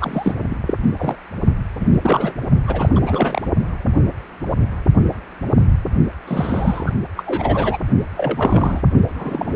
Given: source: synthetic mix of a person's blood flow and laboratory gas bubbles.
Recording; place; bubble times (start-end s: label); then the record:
Doppler ultrasound of blood flow; precordium
0.00-0.44 s: bubbles
0.49-0.56 s: bubbles
0.66-0.73 s: bubbles
0.97-1.17 s: bubbles
1.80-2.35 s: bubbles
2.68-2.90 s: bubbles
2.94-3.42 s: bubbles
6.27-6.93 s: bubbles
7.17-7.23 s: bubbles
7.26-7.78 s: bubbles
8.16-8.81 s: bubbles
9.15-9.56 s: bubbles
From the record:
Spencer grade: 3 (all of the cardiac periods contain showers or single bubble signals, but not dominating or overriding the cardiac motion signals); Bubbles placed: only in the low amplitude regions of the cardiac cycle